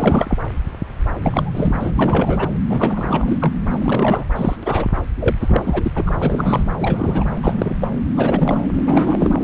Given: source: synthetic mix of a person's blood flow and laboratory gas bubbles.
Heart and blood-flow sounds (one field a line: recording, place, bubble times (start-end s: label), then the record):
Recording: Doppler ultrasound of blood flow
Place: subclavian vein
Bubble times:
0.00-0.38 s: bubbles
1.22-1.91 s: bubbles
1.95-2.48 s: bubbles
2.70-3.38 s: bubbles
3.41-3.52 s: bubbles
3.70-4.23 s: bubbles
4.35-4.56 s: bubbles
4.62-4.86 s: bubbles
5.21-5.35 s: bubbles
5.40-5.80 s: bubbles
5.83-5.92 s: bubbles
5.95-6.02 s: bubbles
6.06-6.63 s: bubbles
6.80-7.25 s: bubbles
7.41-7.75 s: bubbles
7.80-7.88 s: bubbles
8.13-8.65 s: bubbles
8.73-9.36 s: bubbles
From the record:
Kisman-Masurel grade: 332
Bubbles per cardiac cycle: rolling drumbeat, 9 or more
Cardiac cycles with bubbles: 50 to 99%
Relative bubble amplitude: moderate (0.250 to 0.450)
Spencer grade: 3 (all of the cardiac periods contain showers or single bubble signals, but not dominating or overriding the cardiac motion signals)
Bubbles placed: anywhere in the cardiac cycle